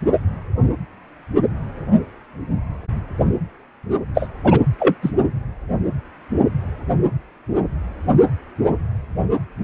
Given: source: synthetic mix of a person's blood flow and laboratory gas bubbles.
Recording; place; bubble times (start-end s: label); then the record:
Doppler ultrasound of blood flow; precordium
4.15-4.28 s: bubbles
4.44-4.59 s: bubbles
4.79-4.95 s: bubbles
5.02-5.11 s: bubbles
From the record:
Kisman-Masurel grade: 113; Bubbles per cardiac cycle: 1 to 2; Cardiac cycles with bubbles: 1 to 10%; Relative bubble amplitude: loud (0.450 to 0.775); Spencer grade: 1 (occasional bubble signal discernible with the cardiac motion signal, with majority of cardiac periods free of bubbles); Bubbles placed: anywhere in the cardiac cycle